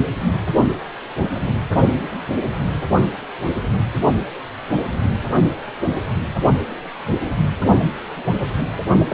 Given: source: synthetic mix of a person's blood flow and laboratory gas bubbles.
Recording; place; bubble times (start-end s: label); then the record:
Doppler ultrasound of blood flow; precordium
9.10-9.14 s: bubbles
From the record:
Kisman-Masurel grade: 213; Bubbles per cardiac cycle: several, 3 to 8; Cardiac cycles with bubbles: 1 to 10%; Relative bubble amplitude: loud (0.450 to 0.775); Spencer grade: 1 (occasional bubble signal discernible with the cardiac motion signal, with majority of cardiac periods free of bubbles); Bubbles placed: only in the low amplitude regions of the cardiac cycle